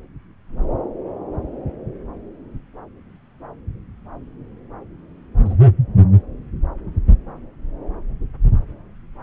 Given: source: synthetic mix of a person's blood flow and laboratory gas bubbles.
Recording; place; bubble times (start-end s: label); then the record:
Doppler ultrasound of blood flow; subclavian vein
5.44-5.56 s: bubbles
From the record:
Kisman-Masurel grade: 111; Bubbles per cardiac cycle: 1 to 2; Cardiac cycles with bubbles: 1 to 10%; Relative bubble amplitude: barely perceptible (0.100 to 0.250); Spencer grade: 1 (occasional bubble signal discernible with the cardiac motion signal, with majority of cardiac periods free of bubbles); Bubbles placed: anywhere in the cardiac cycle